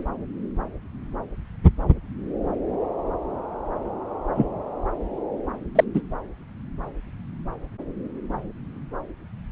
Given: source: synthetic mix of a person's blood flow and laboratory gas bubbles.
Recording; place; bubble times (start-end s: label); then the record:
Doppler ultrasound of blood flow; subclavian vein
4.34-4.46 s: bubbles
5.75-5.84 s: bubbles
5.93-6.01 s: bubbles
From the record:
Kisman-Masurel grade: 123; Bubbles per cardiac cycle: 1 to 2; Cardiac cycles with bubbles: 10 to 50%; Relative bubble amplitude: loud (0.450 to 0.775); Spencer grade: 2 (many but less than half of the cardiac periods contain bubble signals, singularly or in groups); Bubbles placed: anywhere in the cardiac cycle